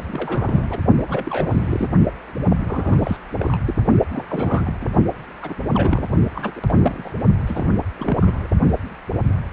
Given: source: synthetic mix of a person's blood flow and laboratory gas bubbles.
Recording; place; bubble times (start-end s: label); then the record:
Doppler ultrasound of blood flow; precordium
0.11-0.77 s: bubbles
1.07-1.89 s: bubbles
2.50-3.17 s: bubbles
3.38-3.57 s: bubbles
3.67-3.75 s: bubbles
4.12-4.25 s: bubbles
4.28-4.74 s: bubbles
4.81-4.86 s: bubbles
5.42-5.55 s: bubbles
5.74-6.08 s: bubbles
6.35-6.52 s: bubbles
6.56-6.61 s: bubbles
6.68-7.11 s: bubbles
7.46-7.66 s: bubbles
7.99-8.17 s: bubbles
8.20-8.47 s: bubbles
From the record:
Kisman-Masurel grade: 332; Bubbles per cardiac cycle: rolling drumbeat, 9 or more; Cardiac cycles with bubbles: 50 to 99%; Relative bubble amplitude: moderate (0.250 to 0.450); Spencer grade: 3 (all of the cardiac periods contain showers or single bubble signals, but not dominating or overriding the cardiac motion signals); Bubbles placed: only in the low amplitude regions of the cardiac cycle